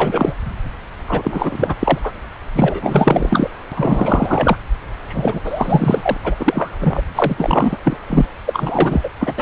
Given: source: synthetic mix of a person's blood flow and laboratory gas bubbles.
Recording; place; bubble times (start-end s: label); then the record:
Doppler ultrasound of blood flow; subclavian vein
0.00-0.34 s: bubbles
1.07-1.76 s: bubbles
1.79-1.98 s: bubbles
2.03-2.12 s: bubbles
2.54-3.50 s: bubbles
3.71-4.57 s: bubbles
5.07-5.41 s: bubbles
5.44-6.17 s: bubbles
6.24-6.34 s: bubbles
6.40-6.70 s: bubbles
6.79-7.02 s: bubbles
7.15-7.78 s: bubbles
7.84-7.97 s: bubbles
8.09-8.26 s: bubbles
8.46-9.10 s: bubbles
9.20-9.42 s: bubbles
From the record:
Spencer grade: 4 (maximum detectable bubble signal sounding continuously throughout systole and diastole of every cardiac period, and overriding the amplitude of the normal cardiac signals); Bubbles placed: anywhere in the cardiac cycle